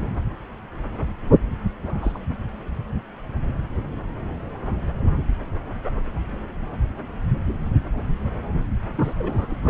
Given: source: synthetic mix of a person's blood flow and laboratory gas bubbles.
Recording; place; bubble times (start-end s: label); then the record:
Doppler ultrasound of blood flow; subclavian vein
1.30-1.39 s: bubbles
1.83-2.21 s: bubbles
8.97-9.14 s: bubbles
9.18-9.54 s: bubbles
9.62-9.69 s: bubbles
From the record:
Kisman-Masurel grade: 221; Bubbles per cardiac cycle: several, 3 to 8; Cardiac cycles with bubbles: 10 to 50%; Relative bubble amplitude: barely perceptible (0.100 to 0.250); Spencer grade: 2 (many but less than half of the cardiac periods contain bubble signals, singularly or in groups); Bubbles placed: anywhere in the cardiac cycle